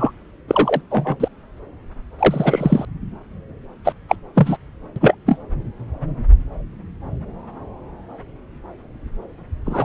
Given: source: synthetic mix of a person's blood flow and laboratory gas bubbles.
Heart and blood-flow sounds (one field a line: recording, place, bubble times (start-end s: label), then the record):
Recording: Doppler ultrasound of blood flow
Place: subclavian vein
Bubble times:
0.00-0.12 s: bubbles
0.47-0.81 s: bubbles
0.90-1.15 s: bubbles
1.19-1.28 s: bubbles
2.19-2.85 s: bubbles
3.85-3.93 s: bubbles
4.08-4.15 s: bubbles
4.35-4.57 s: bubbles
4.96-5.14 s: bubbles
5.26-5.38 s: bubbles
9.66-9.85 s: bubbles
From the record:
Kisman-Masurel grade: 233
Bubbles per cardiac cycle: several, 3 to 8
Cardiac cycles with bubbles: 50 to 99%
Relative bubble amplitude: loud (0.450 to 0.775)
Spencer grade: 3 (all of the cardiac periods contain showers or single bubble signals, but not dominating or overriding the cardiac motion signals)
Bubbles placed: anywhere in the cardiac cycle